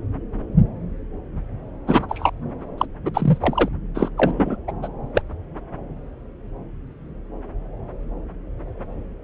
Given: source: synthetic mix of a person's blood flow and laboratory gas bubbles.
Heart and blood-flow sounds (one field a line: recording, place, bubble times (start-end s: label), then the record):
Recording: Doppler ultrasound of blood flow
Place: subclavian vein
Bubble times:
1.87-2.30 s: bubbles
2.77-2.85 s: bubbles
3.05-3.10 s: bubbles
3.13-3.68 s: bubbles
3.95-4.10 s: bubbles
4.17-4.56 s: bubbles
4.67-4.72 s: bubbles
4.82-4.88 s: bubbles
5.14-5.21 s: bubbles
From the record:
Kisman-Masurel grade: 223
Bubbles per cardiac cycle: several, 3 to 8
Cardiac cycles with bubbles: 10 to 50%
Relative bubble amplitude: loud (0.450 to 0.775)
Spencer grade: 2 (many but less than half of the cardiac periods contain bubble signals, singularly or in groups)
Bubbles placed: anywhere in the cardiac cycle